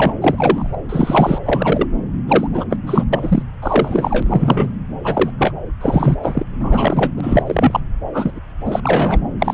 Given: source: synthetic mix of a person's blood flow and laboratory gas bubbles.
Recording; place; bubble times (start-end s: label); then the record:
Doppler ultrasound of blood flow; subclavian vein
0.00-0.12 s: bubbles
0.21-0.77 s: bubbles
0.89-1.39 s: bubbles
1.45-1.87 s: bubbles
2.28-2.47 s: bubbles
2.53-2.65 s: bubbles
2.70-2.77 s: bubbles
2.86-3.05 s: bubbles
3.12-3.43 s: bubbles
3.62-4.23 s: bubbles
4.26-4.71 s: bubbles
5.04-5.31 s: bubbles
5.38-5.54 s: bubbles
5.81-6.19 s: bubbles
6.23-6.44 s: bubbles
6.59-7.12 s: bubbles
7.17-7.43 s: bubbles
7.46-7.80 s: bubbles
8.12-8.39 s: bubbles
8.65-8.80 s: bubbles
8.83-9.21 s: bubbles
9.39-9.54 s: bubbles
From the record:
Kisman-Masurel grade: 243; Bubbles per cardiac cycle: several, 3 to 8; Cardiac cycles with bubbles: 100%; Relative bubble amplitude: loud (0.450 to 0.775); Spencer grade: 3 (all of the cardiac periods contain showers or single bubble signals, but not dominating or overriding the cardiac motion signals); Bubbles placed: anywhere in the cardiac cycle